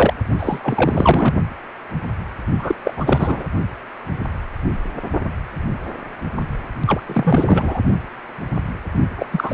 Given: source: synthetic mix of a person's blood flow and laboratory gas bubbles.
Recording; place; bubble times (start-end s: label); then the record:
Doppler ultrasound of blood flow; precordium
0.00-0.14 s: bubbles
0.39-0.59 s: bubbles
0.64-1.34 s: bubbles
2.58-2.75 s: bubbles
2.84-2.94 s: bubbles
2.96-3.45 s: bubbles
6.86-7.01 s: bubbles
7.06-7.79 s: bubbles
9.16-9.26 s: bubbles
9.32-9.54 s: bubbles
From the record:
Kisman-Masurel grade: 333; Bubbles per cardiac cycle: rolling drumbeat, 9 or more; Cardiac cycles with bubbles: 50 to 99%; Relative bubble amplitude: loud (0.450 to 0.775); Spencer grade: 3 (all of the cardiac periods contain showers or single bubble signals, but not dominating or overriding the cardiac motion signals); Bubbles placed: only in the low amplitude regions of the cardiac cycle